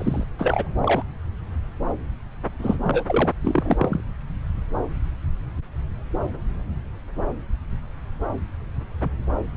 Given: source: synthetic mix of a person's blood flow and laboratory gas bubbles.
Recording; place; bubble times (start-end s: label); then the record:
Doppler ultrasound of blood flow; subclavian vein
0.00-0.23 s: bubbles
0.38-0.68 s: bubbles
0.83-1.03 s: bubbles
2.59-2.77 s: bubbles
2.83-3.04 s: bubbles
3.07-3.30 s: bubbles
3.42-4.00 s: bubbles
From the record:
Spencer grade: 3 (all of the cardiac periods contain showers or single bubble signals, but not dominating or overriding the cardiac motion signals); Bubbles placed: anywhere in the cardiac cycle